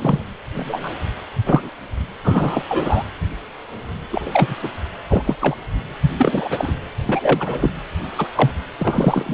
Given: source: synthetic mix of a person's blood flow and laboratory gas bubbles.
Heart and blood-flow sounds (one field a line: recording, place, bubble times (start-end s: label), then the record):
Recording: Doppler ultrasound of blood flow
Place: precordium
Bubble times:
0.00-0.26 s: bubbles
0.55-0.93 s: bubbles
1.46-1.69 s: bubbles
2.23-2.65 s: bubbles
2.69-3.03 s: bubbles
4.10-4.55 s: bubbles
4.62-4.68 s: bubbles
5.08-5.22 s: bubbles
5.26-5.36 s: bubbles
5.41-5.55 s: bubbles
6.18-6.73 s: bubbles
7.07-7.70 s: bubbles
8.17-8.28 s: bubbles
8.35-8.52 s: bubbles
8.79-9.34 s: bubbles
From the record:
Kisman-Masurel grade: 233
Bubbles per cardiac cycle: several, 3 to 8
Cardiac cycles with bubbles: 50 to 99%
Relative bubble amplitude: loud (0.450 to 0.775)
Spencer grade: 3 (all of the cardiac periods contain showers or single bubble signals, but not dominating or overriding the cardiac motion signals)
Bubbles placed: anywhere in the cardiac cycle